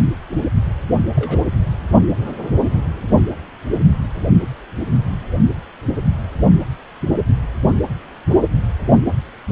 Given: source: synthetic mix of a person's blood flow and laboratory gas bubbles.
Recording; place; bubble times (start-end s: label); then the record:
Doppler ultrasound of blood flow; precordium
1.15-1.40 s: bubbles
From the record:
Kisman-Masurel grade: 111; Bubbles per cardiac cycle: 1 to 2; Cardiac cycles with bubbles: 1 to 10%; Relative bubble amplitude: barely perceptible (0.100 to 0.250); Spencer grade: 1 (occasional bubble signal discernible with the cardiac motion signal, with majority of cardiac periods free of bubbles); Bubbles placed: only in the low amplitude regions of the cardiac cycle